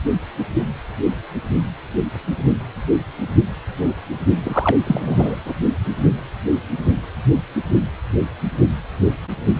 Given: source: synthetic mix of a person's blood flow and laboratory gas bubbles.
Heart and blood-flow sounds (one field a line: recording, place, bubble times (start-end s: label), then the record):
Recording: Doppler ultrasound of blood flow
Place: precordium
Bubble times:
4.42-4.79 s: bubbles
4.87-5.38 s: bubbles
5.45-5.54 s: bubbles
From the record:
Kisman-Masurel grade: 213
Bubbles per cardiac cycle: several, 3 to 8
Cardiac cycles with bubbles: 1 to 10%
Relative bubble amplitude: loud (0.450 to 0.775)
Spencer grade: 1 (occasional bubble signal discernible with the cardiac motion signal, with majority of cardiac periods free of bubbles)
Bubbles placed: only in the low amplitude regions of the cardiac cycle